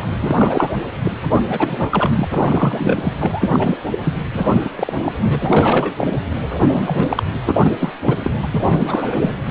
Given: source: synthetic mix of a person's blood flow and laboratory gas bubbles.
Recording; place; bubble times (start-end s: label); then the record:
Doppler ultrasound of blood flow; precordium
0.00-0.09 s: bubbles
0.17-0.70 s: bubbles
1.04-1.11 s: bubbles
1.30-1.40 s: bubbles
1.47-3.12 s: bubbles
3.19-3.78 s: bubbles
3.91-3.98 s: bubbles
4.02-4.23 s: bubbles
4.34-4.70 s: bubbles
4.76-5.13 s: bubbles
5.27-5.93 s: bubbles
5.97-6.07 s: bubbles
6.48-7.23 s: bubbles
7.46-7.92 s: bubbles
8.04-8.17 s: bubbles
8.22-8.32 s: bubbles
8.43-8.47 s: bubbles
8.52-9.18 s: bubbles
9.21-9.30 s: bubbles
From the record:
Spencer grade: 3 (all of the cardiac periods contain showers or single bubble signals, but not dominating or overriding the cardiac motion signals); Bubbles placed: anywhere in the cardiac cycle